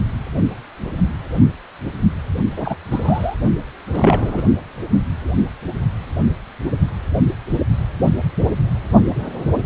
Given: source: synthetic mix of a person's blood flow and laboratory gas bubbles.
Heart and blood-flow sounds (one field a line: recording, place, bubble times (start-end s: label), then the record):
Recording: Doppler ultrasound of blood flow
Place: precordium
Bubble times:
2.56-2.77 s: bubbles
2.90-3.35 s: bubbles
3.87-4.43 s: bubbles
From the record:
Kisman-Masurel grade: 222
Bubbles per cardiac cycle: several, 3 to 8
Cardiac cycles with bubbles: 10 to 50%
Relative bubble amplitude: moderate (0.250 to 0.450)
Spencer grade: 2 (many but less than half of the cardiac periods contain bubble signals, singularly or in groups)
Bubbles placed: only in the low amplitude regions of the cardiac cycle